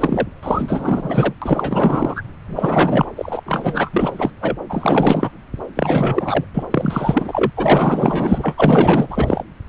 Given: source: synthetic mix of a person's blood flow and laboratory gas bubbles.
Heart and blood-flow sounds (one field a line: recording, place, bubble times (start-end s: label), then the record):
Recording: Doppler ultrasound of blood flow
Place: subclavian vein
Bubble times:
0.00-0.27 s: bubbles
0.42-1.33 s: bubbles
1.42-2.23 s: bubbles
2.46-3.12 s: bubbles
3.16-3.41 s: bubbles
3.46-3.90 s: bubbles
3.93-4.30 s: bubbles
4.41-4.56 s: bubbles
4.69-5.30 s: bubbles
5.75-6.45 s: bubbles
6.54-6.63 s: bubbles
6.71-7.51 s: bubbles
7.56-9.44 s: bubbles
From the record:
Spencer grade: 4 (maximum detectable bubble signal sounding continuously throughout systole and diastole of every cardiac period, and overriding the amplitude of the normal cardiac signals)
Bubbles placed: anywhere in the cardiac cycle